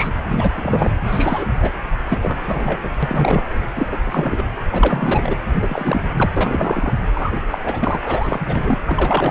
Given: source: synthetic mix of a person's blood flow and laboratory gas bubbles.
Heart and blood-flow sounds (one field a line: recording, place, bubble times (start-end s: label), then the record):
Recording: Doppler ultrasound of blood flow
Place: precordium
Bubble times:
0.00-0.09 s: bubbles
0.28-0.52 s: bubbles
0.56-0.94 s: bubbles
1.05-1.46 s: bubbles
1.61-1.72 s: bubbles
2.08-2.17 s: bubbles
2.21-2.38 s: bubbles
2.46-2.79 s: bubbles
2.83-2.88 s: bubbles
3.03-3.61 s: bubbles
3.76-3.86 s: bubbles
3.91-3.99 s: bubbles
4.04-4.44 s: bubbles
4.71-5.37 s: bubbles
5.54-6.07 s: bubbles
6.16-6.30 s: bubbles
6.36-6.95 s: bubbles
7.15-7.40 s: bubbles
7.52-7.59 s: bubbles
7.65-8.00 s: bubbles
8.04-8.79 s: bubbles
8.87-9.31 s: bubbles
From the record:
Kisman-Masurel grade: 343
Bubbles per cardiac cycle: rolling drumbeat, 9 or more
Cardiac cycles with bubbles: 100%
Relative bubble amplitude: loud (0.450 to 0.775)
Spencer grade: 3 (all of the cardiac periods contain showers or single bubble signals, but not dominating or overriding the cardiac motion signals)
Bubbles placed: anywhere in the cardiac cycle